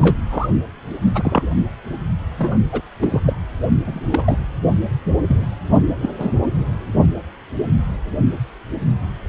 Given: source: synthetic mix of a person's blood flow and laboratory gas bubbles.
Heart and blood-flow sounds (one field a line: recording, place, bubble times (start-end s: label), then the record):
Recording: Doppler ultrasound of blood flow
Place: precordium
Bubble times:
0.00-0.16 s: bubbles
0.30-0.48 s: bubbles
1.15-1.47 s: bubbles
2.38-2.60 s: bubbles
2.72-2.81 s: bubbles
3.00-3.20 s: bubbles
3.26-3.34 s: bubbles
3.86-4.38 s: bubbles
5.28-5.46 s: bubbles
6.01-6.09 s: bubbles
6.19-6.30 s: bubbles
From the record:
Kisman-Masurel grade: 232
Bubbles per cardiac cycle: several, 3 to 8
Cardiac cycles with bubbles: 50 to 99%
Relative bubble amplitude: moderate (0.250 to 0.450)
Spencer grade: 3 (all of the cardiac periods contain showers or single bubble signals, but not dominating or overriding the cardiac motion signals)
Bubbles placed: only in the low amplitude regions of the cardiac cycle